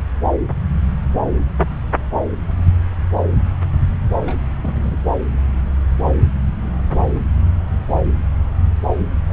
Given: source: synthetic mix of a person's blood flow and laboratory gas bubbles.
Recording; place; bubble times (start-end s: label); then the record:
Doppler ultrasound of blood flow; subclavian vein
4.25-4.36 s: bubbles
4.61-4.99 s: bubbles
9.29-9.33 s: bubbles
From the record:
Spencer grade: 2 (many but less than half of the cardiac periods contain bubble signals, singularly or in groups); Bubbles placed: anywhere in the cardiac cycle